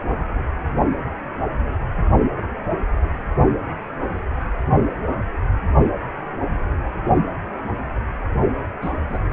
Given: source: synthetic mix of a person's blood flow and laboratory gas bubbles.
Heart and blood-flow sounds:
Doppler ultrasound of blood flow; precordium
8.82-8.90 s: bubbles
9.09-9.18 s: bubbles
From the record:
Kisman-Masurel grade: 112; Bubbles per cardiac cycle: 1 to 2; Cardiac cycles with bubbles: 1 to 10%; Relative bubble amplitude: moderate (0.250 to 0.450); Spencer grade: 1 (occasional bubble signal discernible with the cardiac motion signal, with majority of cardiac periods free of bubbles); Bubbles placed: only in the low amplitude regions of the cardiac cycle

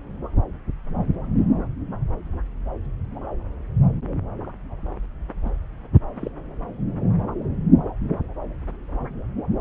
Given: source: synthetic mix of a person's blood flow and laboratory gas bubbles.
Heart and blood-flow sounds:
Doppler ultrasound of blood flow; subclavian vein
5.45-5.49 s: bubbles
6.16-6.29 s: bubbles
From the record:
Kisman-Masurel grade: 121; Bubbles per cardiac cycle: 1 to 2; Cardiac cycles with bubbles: 10 to 50%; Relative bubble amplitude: barely perceptible (0.100 to 0.250); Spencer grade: 2 (many but less than half of the cardiac periods contain bubble signals, singularly or in groups); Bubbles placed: anywhere in the cardiac cycle

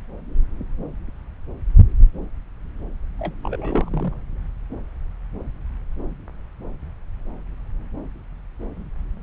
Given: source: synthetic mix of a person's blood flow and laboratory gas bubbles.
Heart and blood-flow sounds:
Doppler ultrasound of blood flow; subclavian vein
3.19-3.34 s: bubbles
3.43-4.14 s: bubbles
From the record:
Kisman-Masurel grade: 211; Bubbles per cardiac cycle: several, 3 to 8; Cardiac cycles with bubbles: 1 to 10%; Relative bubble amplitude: barely perceptible (0.100 to 0.250); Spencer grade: 1 (occasional bubble signal discernible with the cardiac motion signal, with majority of cardiac periods free of bubbles); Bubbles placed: anywhere in the cardiac cycle

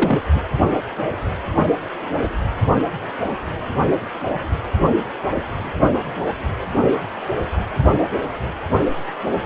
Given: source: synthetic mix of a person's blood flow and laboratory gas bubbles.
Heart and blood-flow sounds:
Doppler ultrasound of blood flow; precordium
0.00-0.19 s: bubbles
0.34-0.41 s: bubbles
From the record:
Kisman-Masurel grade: 212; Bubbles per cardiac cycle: several, 3 to 8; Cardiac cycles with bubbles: 1 to 10%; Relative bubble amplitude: moderate (0.250 to 0.450); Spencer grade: 1 (occasional bubble signal discernible with the cardiac motion signal, with majority of cardiac periods free of bubbles); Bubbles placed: only in the low amplitude regions of the cardiac cycle

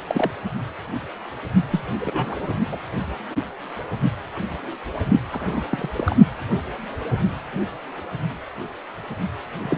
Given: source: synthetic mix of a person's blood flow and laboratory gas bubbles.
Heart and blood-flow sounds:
Doppler ultrasound of blood flow; precordium
0.07-0.30 s: bubbles
1.71-1.81 s: bubbles
2.00-2.52 s: bubbles
2.71-2.78 s: bubbles
5.33-5.88 s: bubbles
5.98-6.15 s: bubbles
9.60-9.77 s: bubbles
From the record:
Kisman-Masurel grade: 232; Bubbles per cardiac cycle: several, 3 to 8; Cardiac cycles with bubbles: 50 to 99%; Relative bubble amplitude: moderate (0.250 to 0.450); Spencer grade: 3 (all of the cardiac periods contain showers or single bubble signals, but not dominating or overriding the cardiac motion signals); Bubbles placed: only in the low amplitude regions of the cardiac cycle

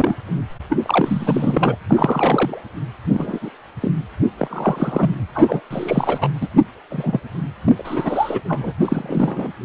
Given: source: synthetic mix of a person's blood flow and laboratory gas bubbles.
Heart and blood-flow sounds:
Doppler ultrasound of blood flow; precordium
0.00-0.16 s: bubbles
0.69-0.77 s: bubbles
0.85-1.76 s: bubbles
1.89-2.62 s: bubbles
3.04-3.39 s: bubbles
3.41-3.50 s: bubbles
3.82-3.91 s: bubbles
4.38-5.16 s: bubbles
5.34-5.61 s: bubbles
5.70-6.29 s: bubbles
6.41-6.48 s: bubbles
6.90-7.20 s: bubbles
7.64-8.40 s: bubbles
8.48-8.73 s: bubbles
8.80-9.52 s: bubbles
From the record:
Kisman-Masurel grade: 242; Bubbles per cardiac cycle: several, 3 to 8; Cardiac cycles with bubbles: 100%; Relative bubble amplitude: moderate (0.250 to 0.450); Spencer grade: 3 (all of the cardiac periods contain showers or single bubble signals, but not dominating or overriding the cardiac motion signals); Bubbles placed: anywhere in the cardiac cycle

